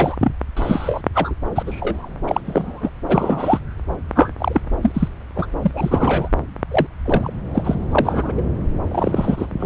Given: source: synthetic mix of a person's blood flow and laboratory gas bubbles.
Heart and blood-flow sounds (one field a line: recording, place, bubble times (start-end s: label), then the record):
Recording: Doppler ultrasound of blood flow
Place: subclavian vein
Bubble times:
0.00-0.16 s: bubbles
0.20-0.32 s: bubbles
0.56-1.02 s: bubbles
1.14-1.34 s: bubbles
1.55-1.62 s: bubbles
1.66-2.09 s: bubbles
2.27-2.40 s: bubbles
2.46-2.90 s: bubbles
3.08-3.58 s: bubbles
4.15-4.32 s: bubbles
4.38-4.61 s: bubbles
4.82-5.08 s: bubbles
5.36-5.46 s: bubbles
5.62-5.71 s: bubbles
5.74-6.28 s: bubbles
6.71-6.87 s: bubbles
7.05-7.32 s: bubbles
7.54-7.76 s: bubbles
7.91-8.32 s: bubbles
8.37-8.43 s: bubbles
8.91-9.47 s: bubbles
9.59-9.66 s: bubbles
From the record:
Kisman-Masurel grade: 243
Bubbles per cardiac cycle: several, 3 to 8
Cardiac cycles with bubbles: 100%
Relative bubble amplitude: loud (0.450 to 0.775)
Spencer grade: 3 (all of the cardiac periods contain showers or single bubble signals, but not dominating or overriding the cardiac motion signals)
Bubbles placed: anywhere in the cardiac cycle